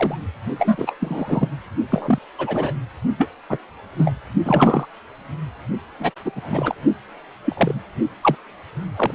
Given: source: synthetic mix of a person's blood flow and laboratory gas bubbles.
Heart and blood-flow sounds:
Doppler ultrasound of blood flow; precordium
0.00-0.16 s: bubbles
0.58-0.96 s: bubbles
1.00-1.49 s: bubbles
1.91-2.19 s: bubbles
2.38-2.73 s: bubbles
3.18-3.29 s: bubbles
3.49-3.59 s: bubbles
3.98-4.13 s: bubbles
4.45-4.86 s: bubbles
5.98-6.10 s: bubbles
6.25-6.31 s: bubbles
6.35-6.75 s: bubbles
7.44-7.79 s: bubbles
8.22-8.35 s: bubbles
8.96-9.11 s: bubbles
From the record:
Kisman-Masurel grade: 243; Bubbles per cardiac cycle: several, 3 to 8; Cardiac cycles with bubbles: 100%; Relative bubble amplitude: loud (0.450 to 0.775); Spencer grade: 3 (all of the cardiac periods contain showers or single bubble signals, but not dominating or overriding the cardiac motion signals); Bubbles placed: only in the low amplitude regions of the cardiac cycle

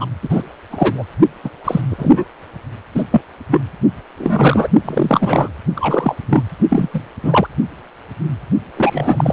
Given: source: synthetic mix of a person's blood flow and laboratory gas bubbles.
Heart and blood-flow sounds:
Doppler ultrasound of blood flow; precordium
0.00-0.06 s: bubbles
0.23-0.42 s: bubbles
0.70-1.04 s: bubbles
1.44-1.49 s: bubbles
1.64-1.82 s: bubbles
1.89-2.24 s: bubbles
2.95-3.04 s: bubbles
3.11-3.21 s: bubbles
3.51-3.62 s: bubbles
4.17-4.68 s: bubbles
4.85-5.50 s: bubbles
5.75-6.17 s: bubbles
6.29-6.42 s: bubbles
6.69-7.06 s: bubbles
7.23-7.47 s: bubbles
8.74-9.33 s: bubbles
From the record:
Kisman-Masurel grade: 233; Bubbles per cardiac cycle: several, 3 to 8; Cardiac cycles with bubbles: 50 to 99%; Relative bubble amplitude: loud (0.450 to 0.775); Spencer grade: 3 (all of the cardiac periods contain showers or single bubble signals, but not dominating or overriding the cardiac motion signals); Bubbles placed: only in the low amplitude regions of the cardiac cycle

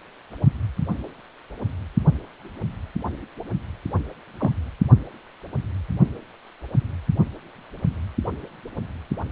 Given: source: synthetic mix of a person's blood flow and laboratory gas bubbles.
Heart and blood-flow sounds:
Doppler ultrasound of blood flow; precordium
4.39-4.51 s: bubbles
From the record:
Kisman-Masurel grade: 112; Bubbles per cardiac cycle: 1 to 2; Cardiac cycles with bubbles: 1 to 10%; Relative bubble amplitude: moderate (0.250 to 0.450); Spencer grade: 1 (occasional bubble signal discernible with the cardiac motion signal, with majority of cardiac periods free of bubbles); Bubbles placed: only in the low amplitude regions of the cardiac cycle

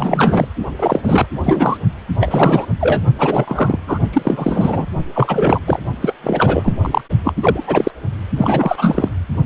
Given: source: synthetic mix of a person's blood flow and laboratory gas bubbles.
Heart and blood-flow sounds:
Doppler ultrasound of blood flow; precordium
0.00-0.47 s: bubbles
0.79-1.00 s: bubbles
1.03-1.27 s: bubbles
1.43-1.77 s: bubbles
2.19-2.65 s: bubbles
2.81-3.02 s: bubbles
3.19-3.79 s: bubbles
3.87-3.99 s: bubbles
4.13-4.86 s: bubbles
5.14-5.59 s: bubbles
5.67-5.79 s: bubbles
6.00-6.13 s: bubbles
6.24-6.74 s: bubbles
6.81-7.01 s: bubbles
7.24-7.33 s: bubbles
7.36-7.63 s: bubbles
7.67-7.91 s: bubbles
8.37-9.09 s: bubbles
From the record:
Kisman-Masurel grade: 343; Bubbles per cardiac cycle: rolling drumbeat, 9 or more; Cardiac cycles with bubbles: 100%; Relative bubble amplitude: loud (0.450 to 0.775); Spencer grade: 3 (all of the cardiac periods contain showers or single bubble signals, but not dominating or overriding the cardiac motion signals); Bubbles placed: only in the low amplitude regions of the cardiac cycle

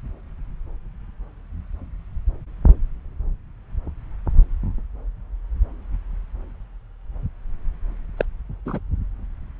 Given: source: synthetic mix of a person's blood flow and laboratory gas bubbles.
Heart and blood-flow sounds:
Doppler ultrasound of blood flow; subclavian vein
8.17-8.25 s: bubbles
8.65-8.79 s: bubbles
From the record:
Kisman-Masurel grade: 112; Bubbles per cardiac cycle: 1 to 2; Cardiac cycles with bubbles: 1 to 10%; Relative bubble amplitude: moderate (0.250 to 0.450); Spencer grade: 1 (occasional bubble signal discernible with the cardiac motion signal, with majority of cardiac periods free of bubbles); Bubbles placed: anywhere in the cardiac cycle

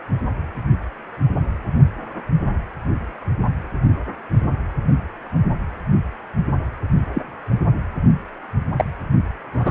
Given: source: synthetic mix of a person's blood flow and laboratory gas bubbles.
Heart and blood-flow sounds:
Doppler ultrasound of blood flow; precordium
7.14-7.22 s: bubbles
8.78-8.85 s: bubbles
9.53-9.70 s: bubbles
From the record:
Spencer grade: 2 (many but less than half of the cardiac periods contain bubble signals, singularly or in groups); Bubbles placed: only in the low amplitude regions of the cardiac cycle

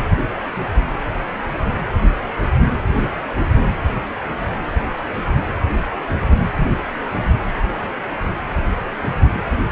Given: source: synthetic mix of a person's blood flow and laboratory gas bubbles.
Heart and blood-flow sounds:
Doppler ultrasound of blood flow; precordium
no bubbles
From the record:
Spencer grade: 0 (complete lack of bubble signals)

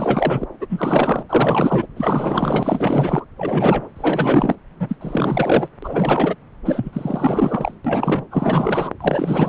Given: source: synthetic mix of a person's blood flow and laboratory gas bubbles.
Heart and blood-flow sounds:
Doppler ultrasound of blood flow; subclavian vein
0.00-0.46 s: bubbles
0.60-0.67 s: bubbles
0.70-1.23 s: bubbles
1.29-1.87 s: bubbles
1.96-3.25 s: bubbles
3.37-3.88 s: bubbles
3.96-4.55 s: bubbles
4.79-4.97 s: bubbles
5.01-5.68 s: bubbles
5.82-6.36 s: bubbles
6.65-7.75 s: bubbles
7.85-8.27 s: bubbles
8.31-8.90 s: bubbles
9.00-9.49 s: bubbles
From the record:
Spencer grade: 4 (maximum detectable bubble signal sounding continuously throughout systole and diastole of every cardiac period, and overriding the amplitude of the normal cardiac signals); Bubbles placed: anywhere in the cardiac cycle

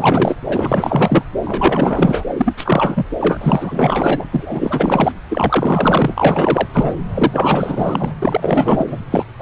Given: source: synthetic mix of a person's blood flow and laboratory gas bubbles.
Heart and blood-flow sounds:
Doppler ultrasound of blood flow; subclavian vein
0.00-0.36 s: bubbles
0.47-1.24 s: bubbles
1.40-2.25 s: bubbles
2.37-2.54 s: bubbles
2.57-3.06 s: bubbles
3.20-3.38 s: bubbles
3.40-4.26 s: bubbles
4.32-5.12 s: bubbles
5.29-6.67 s: bubbles
6.74-6.96 s: bubbles
7.14-8.12 s: bubbles
8.22-8.99 s: bubbles
9.11-9.24 s: bubbles
9.39-9.42 s: bubbles
From the record:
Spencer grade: 4 (maximum detectable bubble signal sounding continuously throughout systole and diastole of every cardiac period, and overriding the amplitude of the normal cardiac signals); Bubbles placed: anywhere in the cardiac cycle

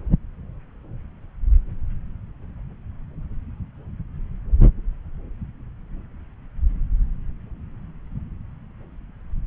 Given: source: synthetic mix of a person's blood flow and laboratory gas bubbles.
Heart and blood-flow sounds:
Doppler ultrasound of blood flow; subclavian vein
no bubbles
From the record:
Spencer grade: 0 (complete lack of bubble signals)

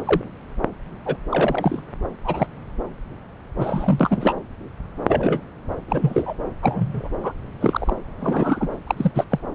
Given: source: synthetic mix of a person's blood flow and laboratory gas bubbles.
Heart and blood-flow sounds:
Doppler ultrasound of blood flow; subclavian vein
0.05-0.22 s: bubbles
1.06-1.17 s: bubbles
1.32-1.82 s: bubbles
2.24-2.46 s: bubbles
3.55-4.35 s: bubbles
5.08-5.41 s: bubbles
5.88-6.33 s: bubbles
6.62-7.09 s: bubbles
7.23-7.33 s: bubbles
7.61-7.96 s: bubbles
8.21-8.68 s: bubbles
8.87-9.12 s: bubbles
9.14-9.25 s: bubbles
9.31-9.39 s: bubbles
From the record:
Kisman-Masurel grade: 242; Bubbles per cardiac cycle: several, 3 to 8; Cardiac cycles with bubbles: 100%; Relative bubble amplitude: moderate (0.250 to 0.450); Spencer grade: 3 (all of the cardiac periods contain showers or single bubble signals, but not dominating or overriding the cardiac motion signals); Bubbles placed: anywhere in the cardiac cycle

